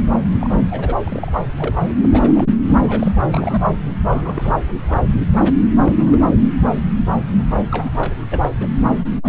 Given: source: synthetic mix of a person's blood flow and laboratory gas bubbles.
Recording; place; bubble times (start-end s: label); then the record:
Doppler ultrasound of blood flow; subclavian vein
0.41-0.51 s: bubbles
0.71-0.97 s: bubbles
1.04-1.31 s: bubbles
1.58-1.75 s: bubbles
1.88-1.94 s: bubbles
2.04-2.09 s: bubbles
2.12-2.32 s: bubbles
2.35-2.44 s: bubbles
2.69-3.12 s: bubbles
3.31-3.63 s: bubbles
4.07-4.64 s: bubbles
4.87-5.01 s: bubbles
5.36-5.45 s: bubbles
5.80-5.94 s: bubbles
5.96-6.31 s: bubbles
6.67-6.80 s: bubbles
7.69-7.89 s: bubbles
7.95-8.40 s: bubbles
8.43-8.49 s: bubbles
8.60-8.74 s: bubbles
9.23-9.29 s: bubbles
From the record:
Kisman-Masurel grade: 232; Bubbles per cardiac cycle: several, 3 to 8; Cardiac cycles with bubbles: 50 to 99%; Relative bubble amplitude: moderate (0.250 to 0.450); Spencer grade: 3 (all of the cardiac periods contain showers or single bubble signals, but not dominating or overriding the cardiac motion signals); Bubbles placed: anywhere in the cardiac cycle